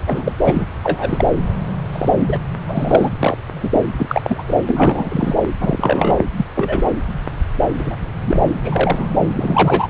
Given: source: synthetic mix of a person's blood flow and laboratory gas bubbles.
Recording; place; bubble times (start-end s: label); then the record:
Doppler ultrasound of blood flow; subclavian vein
0.07-0.34 s: bubbles
0.43-0.65 s: bubbles
0.83-1.24 s: bubbles
1.92-2.12 s: bubbles
2.19-2.36 s: bubbles
2.67-3.10 s: bubbles
3.19-3.38 s: bubbles
3.48-3.80 s: bubbles
3.98-4.43 s: bubbles
4.48-4.56 s: bubbles
4.67-5.34 s: bubbles
5.60-6.22 s: bubbles
6.36-6.46 s: bubbles
6.55-6.90 s: bubbles
7.78-7.96 s: bubbles
8.26-8.41 s: bubbles
8.65-9.08 s: bubbles
9.36-9.88 s: bubbles
From the record:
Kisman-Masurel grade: 243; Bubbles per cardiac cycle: several, 3 to 8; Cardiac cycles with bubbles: 100%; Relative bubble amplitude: loud (0.450 to 0.775); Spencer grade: 3 (all of the cardiac periods contain showers or single bubble signals, but not dominating or overriding the cardiac motion signals); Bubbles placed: anywhere in the cardiac cycle